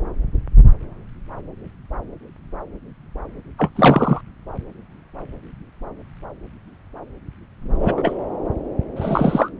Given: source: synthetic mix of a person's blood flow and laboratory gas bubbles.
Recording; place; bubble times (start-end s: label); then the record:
Doppler ultrasound of blood flow; subclavian vein
3.58-3.70 s: bubbles
3.75-4.21 s: bubbles
7.79-8.18 s: bubbles
8.96-9.50 s: bubbles
From the record:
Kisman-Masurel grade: 223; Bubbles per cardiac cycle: several, 3 to 8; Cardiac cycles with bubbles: 10 to 50%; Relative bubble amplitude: loud (0.450 to 0.775); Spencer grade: 2 (many but less than half of the cardiac periods contain bubble signals, singularly or in groups); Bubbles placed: anywhere in the cardiac cycle